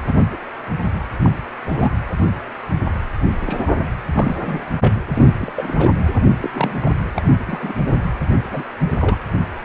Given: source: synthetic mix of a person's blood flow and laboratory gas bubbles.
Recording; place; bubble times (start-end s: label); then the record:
Doppler ultrasound of blood flow; precordium
0.06-0.12 s: bubbles
0.18-0.28 s: bubbles
0.31-0.39 s: bubbles
0.82-0.94 s: bubbles
1.22-1.32 s: bubbles
1.66-1.91 s: bubbles
3.46-3.71 s: bubbles
4.13-4.59 s: bubbles
4.80-4.93 s: bubbles
5.13-5.53 s: bubbles
5.56-5.92 s: bubbles
6.40-6.50 s: bubbles
6.54-6.71 s: bubbles
6.81-6.91 s: bubbles
7.15-7.22 s: bubbles
7.46-7.74 s: bubbles
7.87-7.99 s: bubbles
8.50-8.62 s: bubbles
8.95-9.18 s: bubbles
From the record:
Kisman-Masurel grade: 232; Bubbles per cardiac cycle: several, 3 to 8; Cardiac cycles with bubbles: 50 to 99%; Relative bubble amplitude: moderate (0.250 to 0.450); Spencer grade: 3 (all of the cardiac periods contain showers or single bubble signals, but not dominating or overriding the cardiac motion signals); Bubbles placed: anywhere in the cardiac cycle